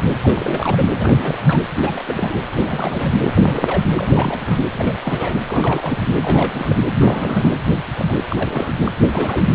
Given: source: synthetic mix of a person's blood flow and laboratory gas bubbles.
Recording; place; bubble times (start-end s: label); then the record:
Doppler ultrasound of blood flow; precordium
0.19-0.85 s: bubbles
0.97-1.62 s: bubbles
1.76-2.03 s: bubbles
2.06-2.40 s: bubbles
2.59-3.09 s: bubbles
3.23-3.33 s: bubbles
3.36-3.42 s: bubbles
3.45-3.82 s: bubbles
3.95-4.61 s: bubbles
4.70-4.94 s: bubbles
5.04-5.36 s: bubbles
5.46-5.98 s: bubbles
6.22-6.82 s: bubbles
7.00-7.54 s: bubbles
7.96-8.05 s: bubbles
8.09-8.25 s: bubbles
8.30-8.73 s: bubbles
8.86-8.92 s: bubbles
9.13-9.48 s: bubbles
From the record:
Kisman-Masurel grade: 342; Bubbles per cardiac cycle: rolling drumbeat, 9 or more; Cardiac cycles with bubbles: 100%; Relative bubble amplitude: moderate (0.250 to 0.450); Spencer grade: 3 (all of the cardiac periods contain showers or single bubble signals, but not dominating or overriding the cardiac motion signals); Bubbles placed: anywhere in the cardiac cycle